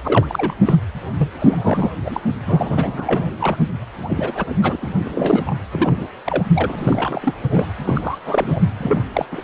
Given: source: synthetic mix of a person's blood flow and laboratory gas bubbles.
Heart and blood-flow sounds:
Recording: Doppler ultrasound of blood flow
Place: precordium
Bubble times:
0.02-0.76 s: bubbles
1.18-1.29 s: bubbles
1.40-1.90 s: bubbles
2.05-2.21 s: bubbles
2.46-3.31 s: bubbles
3.40-3.69 s: bubbles
4.02-4.93 s: bubbles
5.04-5.55 s: bubbles
5.71-6.08 s: bubbles
6.24-6.43 s: bubbles
6.54-6.75 s: bubbles
6.78-7.34 s: bubbles
7.49-7.65 s: bubbles
7.84-8.19 s: bubbles
8.26-8.61 s: bubbles
8.79-9.04 s: bubbles
9.13-9.26 s: bubbles
9.31-9.42 s: bubbles
From the record:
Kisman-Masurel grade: 343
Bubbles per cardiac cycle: rolling drumbeat, 9 or more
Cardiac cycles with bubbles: 100%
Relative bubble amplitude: loud (0.450 to 0.775)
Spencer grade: 3 (all of the cardiac periods contain showers or single bubble signals, but not dominating or overriding the cardiac motion signals)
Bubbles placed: anywhere in the cardiac cycle

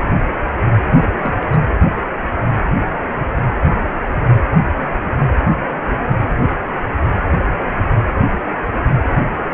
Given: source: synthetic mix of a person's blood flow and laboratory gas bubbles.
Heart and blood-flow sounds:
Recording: Doppler ultrasound of blood flow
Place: precordium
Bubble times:
1.00-1.16 s: bubbles
1.21-1.34 s: bubbles
1.40-1.47 s: bubbles
1.50-1.59 s: bubbles
From the record:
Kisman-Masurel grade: 211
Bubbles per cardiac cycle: several, 3 to 8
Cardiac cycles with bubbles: 1 to 10%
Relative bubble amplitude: barely perceptible (0.100 to 0.250)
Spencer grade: 1 (occasional bubble signal discernible with the cardiac motion signal, with majority of cardiac periods free of bubbles)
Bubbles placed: anywhere in the cardiac cycle

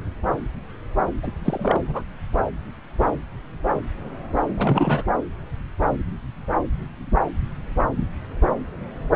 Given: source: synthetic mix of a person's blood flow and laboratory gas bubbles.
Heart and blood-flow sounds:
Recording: Doppler ultrasound of blood flow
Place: subclavian vein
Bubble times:
1.23-1.31 s: bubbles
1.45-1.81 s: bubbles
1.83-2.04 s: bubbles
4.47-5.04 s: bubbles
From the record:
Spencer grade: 1 (occasional bubble signal discernible with the cardiac motion signal, with majority of cardiac periods free of bubbles)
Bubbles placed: anywhere in the cardiac cycle

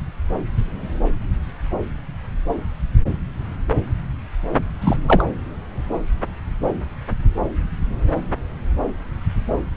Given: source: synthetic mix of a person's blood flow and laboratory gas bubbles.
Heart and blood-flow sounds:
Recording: Doppler ultrasound of blood flow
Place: subclavian vein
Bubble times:
4.81-4.97 s: bubbles
5.07-5.25 s: bubbles
From the record:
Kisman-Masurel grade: 213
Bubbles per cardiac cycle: several, 3 to 8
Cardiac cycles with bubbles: 1 to 10%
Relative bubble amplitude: loud (0.450 to 0.775)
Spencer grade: 1 (occasional bubble signal discernible with the cardiac motion signal, with majority of cardiac periods free of bubbles)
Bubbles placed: anywhere in the cardiac cycle

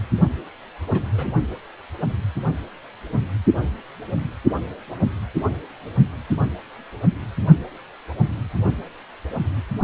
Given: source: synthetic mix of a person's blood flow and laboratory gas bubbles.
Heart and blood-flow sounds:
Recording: Doppler ultrasound of blood flow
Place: precordium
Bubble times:
0.88-1.32 s: bubbles
From the record:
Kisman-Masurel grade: 111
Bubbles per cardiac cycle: 1 to 2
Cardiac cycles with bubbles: 1 to 10%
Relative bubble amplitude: barely perceptible (0.100 to 0.250)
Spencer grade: 1 (occasional bubble signal discernible with the cardiac motion signal, with majority of cardiac periods free of bubbles)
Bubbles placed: only in the low amplitude regions of the cardiac cycle

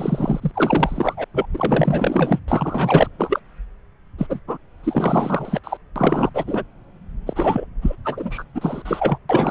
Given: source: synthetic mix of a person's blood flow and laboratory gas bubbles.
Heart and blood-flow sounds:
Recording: Doppler ultrasound of blood flow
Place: subclavian vein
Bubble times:
0.00-1.24 s: bubbles
1.33-1.46 s: bubbles
1.53-2.40 s: bubbles
2.48-3.08 s: bubbles
3.18-3.40 s: bubbles
4.17-4.26 s: bubbles
4.29-4.40 s: bubbles
4.47-4.57 s: bubbles
4.83-5.60 s: bubbles
5.63-5.77 s: bubbles
5.96-6.29 s: bubbles
6.34-6.43 s: bubbles
6.46-6.63 s: bubbles
7.26-7.67 s: bubbles
7.81-7.95 s: bubbles
8.04-8.44 s: bubbles
8.54-8.82 s: bubbles
8.85-9.18 s: bubbles
9.29-9.51 s: bubbles
From the record:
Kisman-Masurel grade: 444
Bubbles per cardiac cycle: continuous sound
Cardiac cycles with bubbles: 100%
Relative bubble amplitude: maximal (0.775 to 0.999)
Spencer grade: 4 (maximum detectable bubble signal sounding continuously throughout systole and diastole of every cardiac period, and overriding the amplitude of the normal cardiac signals)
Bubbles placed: anywhere in the cardiac cycle

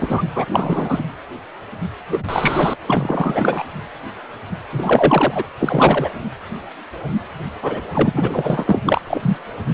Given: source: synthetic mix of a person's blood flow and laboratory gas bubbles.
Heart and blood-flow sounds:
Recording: Doppler ultrasound of blood flow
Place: precordium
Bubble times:
0.00-0.22 s: bubbles
0.35-0.46 s: bubbles
0.51-1.02 s: bubbles
2.11-2.23 s: bubbles
2.29-2.76 s: bubbles
2.87-3.63 s: bubbles
4.72-5.43 s: bubbles
5.59-6.09 s: bubbles
7.61-7.81 s: bubbles
7.93-8.63 s: bubbles
8.65-8.79 s: bubbles
8.85-9.01 s: bubbles
9.07-9.37 s: bubbles
From the record:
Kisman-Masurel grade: 332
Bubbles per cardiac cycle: rolling drumbeat, 9 or more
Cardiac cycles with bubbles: 50 to 99%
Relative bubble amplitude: moderate (0.250 to 0.450)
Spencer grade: 3 (all of the cardiac periods contain showers or single bubble signals, but not dominating or overriding the cardiac motion signals)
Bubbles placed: anywhere in the cardiac cycle

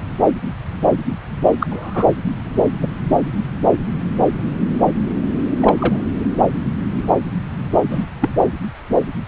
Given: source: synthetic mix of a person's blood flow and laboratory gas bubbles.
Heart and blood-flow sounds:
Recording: Doppler ultrasound of blood flow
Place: subclavian vein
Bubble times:
1.60-1.67 s: bubbles
1.69-2.06 s: bubbles
2.82-2.88 s: bubbles
5.60-6.03 s: bubbles
7.91-8.05 s: bubbles
8.21-8.29 s: bubbles
From the record:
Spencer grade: 2 (many but less than half of the cardiac periods contain bubble signals, singularly or in groups)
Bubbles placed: anywhere in the cardiac cycle

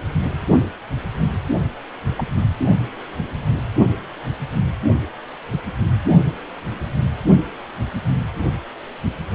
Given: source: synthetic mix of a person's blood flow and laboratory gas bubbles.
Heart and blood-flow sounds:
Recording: Doppler ultrasound of blood flow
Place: precordium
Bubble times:
2.17-2.24 s: bubbles
From the record:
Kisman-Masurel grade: 111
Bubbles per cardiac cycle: 1 to 2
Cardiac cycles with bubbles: 1 to 10%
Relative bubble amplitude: barely perceptible (0.100 to 0.250)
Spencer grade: 1 (occasional bubble signal discernible with the cardiac motion signal, with majority of cardiac periods free of bubbles)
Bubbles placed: only in the low amplitude regions of the cardiac cycle

